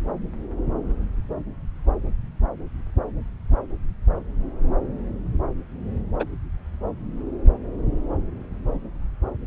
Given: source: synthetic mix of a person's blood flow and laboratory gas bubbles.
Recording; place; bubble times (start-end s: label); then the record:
Doppler ultrasound of blood flow; subclavian vein
6.19-6.24 s: bubbles
From the record:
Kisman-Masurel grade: 122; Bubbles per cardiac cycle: 1 to 2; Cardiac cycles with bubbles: 10 to 50%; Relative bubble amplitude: moderate (0.250 to 0.450); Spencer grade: 2 (many but less than half of the cardiac periods contain bubble signals, singularly or in groups); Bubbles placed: anywhere in the cardiac cycle